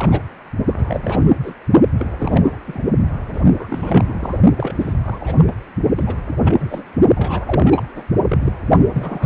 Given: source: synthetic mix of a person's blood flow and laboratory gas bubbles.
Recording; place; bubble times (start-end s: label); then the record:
Doppler ultrasound of blood flow; precordium
0.00-0.23 s: bubbles
0.67-1.54 s: bubbles
1.97-2.57 s: bubbles
2.68-2.83 s: bubbles
3.33-3.42 s: bubbles
3.58-4.38 s: bubbles
4.56-4.75 s: bubbles
4.79-4.94 s: bubbles
5.04-5.54 s: bubbles
5.96-6.16 s: bubbles
6.28-6.37 s: bubbles
6.44-6.84 s: bubbles
7.15-7.86 s: bubbles
7.94-8.04 s: bubbles
8.29-8.52 s: bubbles
8.93-9.26 s: bubbles
From the record:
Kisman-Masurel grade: 342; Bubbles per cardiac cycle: rolling drumbeat, 9 or more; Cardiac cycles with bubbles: 100%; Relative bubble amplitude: moderate (0.250 to 0.450); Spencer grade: 3 (all of the cardiac periods contain showers or single bubble signals, but not dominating or overriding the cardiac motion signals); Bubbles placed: only in the low amplitude regions of the cardiac cycle